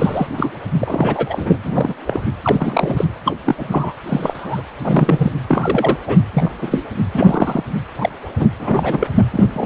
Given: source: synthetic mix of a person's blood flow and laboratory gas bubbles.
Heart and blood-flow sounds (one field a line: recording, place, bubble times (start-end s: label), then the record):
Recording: Doppler ultrasound of blood flow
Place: precordium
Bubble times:
0.00-0.27 s: bubbles
0.32-0.51 s: bubbles
0.78-1.57 s: bubbles
1.63-1.94 s: bubbles
2.06-2.21 s: bubbles
2.44-3.04 s: bubbles
3.25-3.34 s: bubbles
3.45-3.92 s: bubbles
4.07-4.61 s: bubbles
4.82-5.32 s: bubbles
5.48-5.97 s: bubbles
6.07-6.17 s: bubbles
6.33-6.51 s: bubbles
6.62-6.85 s: bubbles
7.14-7.63 s: bubbles
7.98-8.10 s: bubbles
8.39-8.51 s: bubbles
8.60-9.12 s: bubbles
9.32-9.45 s: bubbles
9.53-9.66 s: bubbles
From the record:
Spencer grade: 3 (all of the cardiac periods contain showers or single bubble signals, but not dominating or overriding the cardiac motion signals)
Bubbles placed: anywhere in the cardiac cycle